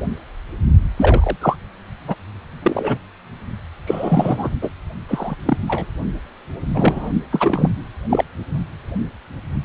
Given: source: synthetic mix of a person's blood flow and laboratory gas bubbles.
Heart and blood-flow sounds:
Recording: Doppler ultrasound of blood flow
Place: precordium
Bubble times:
0.97-1.36 s: bubbles
1.41-1.56 s: bubbles
2.08-2.16 s: bubbles
2.62-2.98 s: bubbles
3.86-4.50 s: bubbles
4.62-4.70 s: bubbles
5.08-5.36 s: bubbles
5.45-5.58 s: bubbles
5.67-5.86 s: bubbles
6.73-7.11 s: bubbles
7.32-7.70 s: bubbles
8.09-8.24 s: bubbles
From the record:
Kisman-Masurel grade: 233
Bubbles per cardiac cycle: several, 3 to 8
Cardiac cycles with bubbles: 50 to 99%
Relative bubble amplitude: loud (0.450 to 0.775)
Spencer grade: 3 (all of the cardiac periods contain showers or single bubble signals, but not dominating or overriding the cardiac motion signals)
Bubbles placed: only in the low amplitude regions of the cardiac cycle

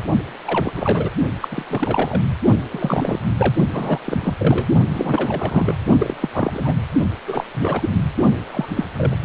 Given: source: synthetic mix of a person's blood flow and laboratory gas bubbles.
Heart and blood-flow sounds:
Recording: Doppler ultrasound of blood flow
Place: precordium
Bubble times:
0.45-0.72 s: bubbles
0.76-1.09 s: bubbles
1.41-1.48 s: bubbles
1.51-1.65 s: bubbles
1.68-2.21 s: bubbles
2.71-3.20 s: bubbles
3.38-3.54 s: bubbles
3.72-4.00 s: bubbles
4.04-4.33 s: bubbles
4.38-4.67 s: bubbles
4.92-5.77 s: bubbles
5.98-6.17 s: bubbles
6.21-6.29 s: bubbles
6.33-6.74 s: bubbles
7.26-7.44 s: bubbles
7.54-7.90 s: bubbles
8.52-8.65 s: bubbles
8.75-8.86 s: bubbles
8.97-9.16 s: bubbles
From the record:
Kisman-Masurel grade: 342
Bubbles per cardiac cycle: rolling drumbeat, 9 or more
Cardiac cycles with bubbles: 100%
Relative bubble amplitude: moderate (0.250 to 0.450)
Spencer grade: 3 (all of the cardiac periods contain showers or single bubble signals, but not dominating or overriding the cardiac motion signals)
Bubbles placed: only in the low amplitude regions of the cardiac cycle

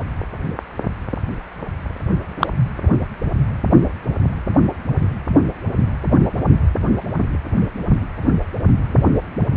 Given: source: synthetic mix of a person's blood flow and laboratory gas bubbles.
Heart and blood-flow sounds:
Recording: Doppler ultrasound of blood flow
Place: precordium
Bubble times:
2.40-2.47 s: bubbles
From the record:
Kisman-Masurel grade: 113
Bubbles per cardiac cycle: 1 to 2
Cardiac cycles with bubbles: 1 to 10%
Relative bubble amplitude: loud (0.450 to 0.775)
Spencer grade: 1 (occasional bubble signal discernible with the cardiac motion signal, with majority of cardiac periods free of bubbles)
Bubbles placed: only in the low amplitude regions of the cardiac cycle

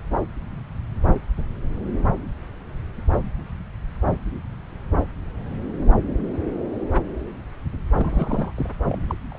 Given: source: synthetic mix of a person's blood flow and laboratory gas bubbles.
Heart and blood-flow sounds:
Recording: Doppler ultrasound of blood flow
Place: subclavian vein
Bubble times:
7.98-8.52 s: bubbles
8.56-8.70 s: bubbles
8.88-9.01 s: bubbles
9.07-9.15 s: bubbles
9.31-9.39 s: bubbles
From the record:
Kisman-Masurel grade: 221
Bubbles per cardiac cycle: several, 3 to 8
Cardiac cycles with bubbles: 10 to 50%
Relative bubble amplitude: barely perceptible (0.100 to 0.250)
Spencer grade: 2 (many but less than half of the cardiac periods contain bubble signals, singularly or in groups)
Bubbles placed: anywhere in the cardiac cycle

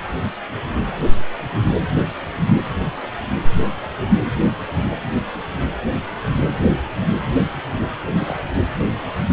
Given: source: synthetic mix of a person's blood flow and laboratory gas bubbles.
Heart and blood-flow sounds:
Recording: Doppler ultrasound of blood flow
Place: precordium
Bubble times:
8.17-8.42 s: bubbles
From the record:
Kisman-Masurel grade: 211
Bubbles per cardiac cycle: several, 3 to 8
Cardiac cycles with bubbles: 1 to 10%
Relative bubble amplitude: barely perceptible (0.100 to 0.250)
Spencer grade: 1 (occasional bubble signal discernible with the cardiac motion signal, with majority of cardiac periods free of bubbles)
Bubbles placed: anywhere in the cardiac cycle

